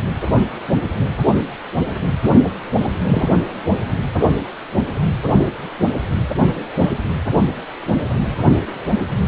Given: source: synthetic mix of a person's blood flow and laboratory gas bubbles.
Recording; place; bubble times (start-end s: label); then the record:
Doppler ultrasound of blood flow; precordium
3.08-3.29 s: bubbles
6.79-6.94 s: bubbles
From the record:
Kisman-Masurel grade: 123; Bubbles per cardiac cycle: 1 to 2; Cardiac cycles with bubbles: 10 to 50%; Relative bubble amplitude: loud (0.450 to 0.775); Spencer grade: 2 (many but less than half of the cardiac periods contain bubble signals, singularly or in groups); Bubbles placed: only in the low amplitude regions of the cardiac cycle